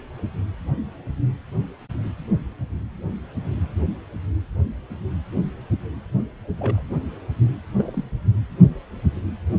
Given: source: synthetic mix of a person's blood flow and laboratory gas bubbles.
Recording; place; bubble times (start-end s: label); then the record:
Doppler ultrasound of blood flow; precordium
6.58-6.82 s: bubbles
7.78-8.04 s: bubbles
From the record:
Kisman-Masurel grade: 121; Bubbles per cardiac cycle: 1 to 2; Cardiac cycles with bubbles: 10 to 50%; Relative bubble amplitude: barely perceptible (0.100 to 0.250); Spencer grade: 2 (many but less than half of the cardiac periods contain bubble signals, singularly or in groups); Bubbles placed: anywhere in the cardiac cycle